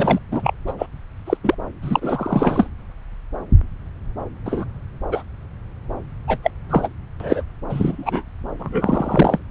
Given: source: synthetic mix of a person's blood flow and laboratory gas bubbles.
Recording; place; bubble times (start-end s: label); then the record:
Doppler ultrasound of blood flow; subclavian vein
0.00-0.18 s: bubbles
0.31-0.53 s: bubbles
0.67-0.72 s: bubbles
0.78-0.86 s: bubbles
1.26-1.37 s: bubbles
1.44-1.55 s: bubbles
1.82-2.68 s: bubbles
4.45-4.65 s: bubbles
5.12-5.23 s: bubbles
6.28-6.38 s: bubbles
6.42-6.50 s: bubbles
6.70-6.88 s: bubbles
7.20-7.42 s: bubbles
7.70-8.23 s: bubbles
8.60-9.39 s: bubbles
From the record:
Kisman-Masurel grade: 233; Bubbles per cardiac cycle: several, 3 to 8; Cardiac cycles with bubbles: 50 to 99%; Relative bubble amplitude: loud (0.450 to 0.775); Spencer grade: 3 (all of the cardiac periods contain showers or single bubble signals, but not dominating or overriding the cardiac motion signals); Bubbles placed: anywhere in the cardiac cycle